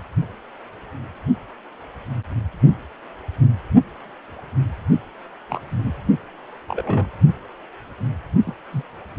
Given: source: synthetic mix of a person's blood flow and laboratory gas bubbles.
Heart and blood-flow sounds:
Doppler ultrasound of blood flow; precordium
5.50-5.61 s: bubbles
5.70-5.92 s: bubbles
6.67-7.07 s: bubbles
8.46-8.53 s: bubbles
8.72-8.83 s: bubbles
From the record:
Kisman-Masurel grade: 122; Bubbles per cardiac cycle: 1 to 2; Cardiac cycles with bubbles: 10 to 50%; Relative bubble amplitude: moderate (0.250 to 0.450); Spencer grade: 2 (many but less than half of the cardiac periods contain bubble signals, singularly or in groups); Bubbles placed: only in the low amplitude regions of the cardiac cycle

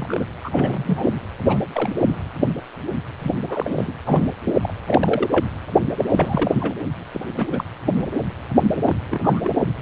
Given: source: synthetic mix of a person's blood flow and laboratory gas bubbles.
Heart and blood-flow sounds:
Doppler ultrasound of blood flow; precordium
0.00-0.24 s: bubbles
0.43-1.19 s: bubbles
1.47-1.57 s: bubbles
1.73-1.96 s: bubbles
2.06-2.21 s: bubbles
3.19-3.34 s: bubbles
3.48-3.70 s: bubbles
3.76-3.94 s: bubbles
4.06-4.33 s: bubbles
4.45-4.54 s: bubbles
4.62-4.74 s: bubbles
4.87-5.29 s: bubbles
5.32-5.47 s: bubbles
5.98-6.05 s: bubbles
6.10-6.74 s: bubbles
7.12-7.21 s: bubbles
7.38-7.47 s: bubbles
7.52-7.64 s: bubbles
7.93-8.04 s: bubbles
8.75-8.96 s: bubbles
9.10-9.20 s: bubbles
9.23-9.41 s: bubbles
9.43-9.50 s: bubbles
From the record:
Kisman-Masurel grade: 232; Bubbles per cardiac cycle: several, 3 to 8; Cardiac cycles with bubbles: 50 to 99%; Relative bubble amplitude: moderate (0.250 to 0.450); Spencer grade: 3 (all of the cardiac periods contain showers or single bubble signals, but not dominating or overriding the cardiac motion signals); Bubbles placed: anywhere in the cardiac cycle

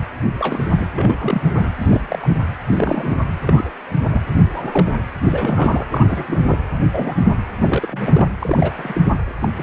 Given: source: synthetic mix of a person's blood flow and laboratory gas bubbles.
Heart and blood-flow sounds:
Doppler ultrasound of blood flow; precordium
0.40-0.87 s: bubbles
0.93-1.68 s: bubbles
1.81-2.37 s: bubbles
2.64-3.18 s: bubbles
3.41-3.71 s: bubbles
4.12-4.21 s: bubbles
4.48-4.93 s: bubbles
5.24-5.86 s: bubbles
5.90-6.42 s: bubbles
6.48-6.57 s: bubbles
6.92-7.15 s: bubbles
7.60-8.31 s: bubbles
8.39-9.01 s: bubbles
9.42-9.48 s: bubbles
9.57-9.63 s: bubbles
From the record:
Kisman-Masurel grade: 242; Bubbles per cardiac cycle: several, 3 to 8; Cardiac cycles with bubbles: 100%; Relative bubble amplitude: moderate (0.250 to 0.450); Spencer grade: 3 (all of the cardiac periods contain showers or single bubble signals, but not dominating or overriding the cardiac motion signals); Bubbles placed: anywhere in the cardiac cycle

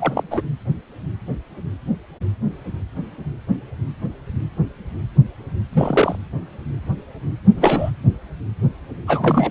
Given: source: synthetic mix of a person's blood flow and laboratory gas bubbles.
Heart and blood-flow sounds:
Doppler ultrasound of blood flow; precordium
0.00-0.23 s: bubbles
0.31-0.43 s: bubbles
5.73-6.15 s: bubbles
7.56-7.90 s: bubbles
9.06-9.51 s: bubbles
From the record:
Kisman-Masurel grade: 222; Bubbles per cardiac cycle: several, 3 to 8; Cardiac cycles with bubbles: 10 to 50%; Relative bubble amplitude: moderate (0.250 to 0.450); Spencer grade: 2 (many but less than half of the cardiac periods contain bubble signals, singularly or in groups); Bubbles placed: anywhere in the cardiac cycle

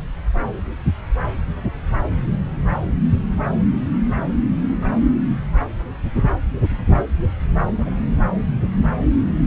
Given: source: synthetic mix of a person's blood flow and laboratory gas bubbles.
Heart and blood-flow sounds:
Doppler ultrasound of blood flow; subclavian vein
7.67-7.91 s: bubbles
From the record:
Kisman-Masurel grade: 121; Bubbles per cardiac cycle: 1 to 2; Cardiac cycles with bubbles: 10 to 50%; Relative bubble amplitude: barely perceptible (0.100 to 0.250); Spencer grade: 2 (many but less than half of the cardiac periods contain bubble signals, singularly or in groups); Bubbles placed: anywhere in the cardiac cycle

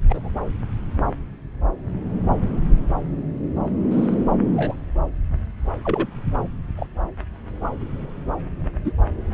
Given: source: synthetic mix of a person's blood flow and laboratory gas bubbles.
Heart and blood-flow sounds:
Doppler ultrasound of blood flow; subclavian vein
0.09-0.32 s: bubbles
3.91-4.15 s: bubbles
4.55-4.74 s: bubbles
5.85-6.08 s: bubbles
6.77-6.87 s: bubbles
8.85-8.92 s: bubbles
From the record:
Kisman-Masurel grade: 122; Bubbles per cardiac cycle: 1 to 2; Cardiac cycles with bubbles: 10 to 50%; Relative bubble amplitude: moderate (0.250 to 0.450); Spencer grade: 2 (many but less than half of the cardiac periods contain bubble signals, singularly or in groups); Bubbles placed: anywhere in the cardiac cycle

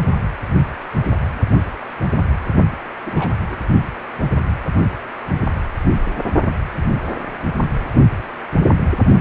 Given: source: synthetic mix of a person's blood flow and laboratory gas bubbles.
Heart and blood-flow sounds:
Doppler ultrasound of blood flow; precordium
3.05-3.34 s: bubbles
3.50-3.56 s: bubbles
From the record:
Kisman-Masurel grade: 211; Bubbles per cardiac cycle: several, 3 to 8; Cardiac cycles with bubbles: 1 to 10%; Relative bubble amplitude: barely perceptible (0.100 to 0.250); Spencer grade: 1 (occasional bubble signal discernible with the cardiac motion signal, with majority of cardiac periods free of bubbles); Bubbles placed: only in the low amplitude regions of the cardiac cycle

